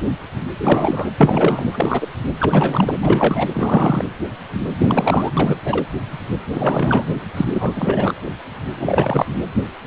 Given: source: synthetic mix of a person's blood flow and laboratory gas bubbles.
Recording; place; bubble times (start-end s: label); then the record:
Doppler ultrasound of blood flow; precordium
0.57-1.10 s: bubbles
1.17-1.66 s: bubbles
1.73-2.08 s: bubbles
2.40-2.96 s: bubbles
3.02-3.49 s: bubbles
3.53-4.05 s: bubbles
4.79-5.30 s: bubbles
5.36-5.57 s: bubbles
5.64-5.86 s: bubbles
6.53-7.05 s: bubbles
7.36-8.13 s: bubbles
8.75-9.26 s: bubbles
From the record:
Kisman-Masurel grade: 333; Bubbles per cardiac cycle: rolling drumbeat, 9 or more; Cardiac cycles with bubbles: 50 to 99%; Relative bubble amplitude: loud (0.450 to 0.775); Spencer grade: 3 (all of the cardiac periods contain showers or single bubble signals, but not dominating or overriding the cardiac motion signals); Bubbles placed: anywhere in the cardiac cycle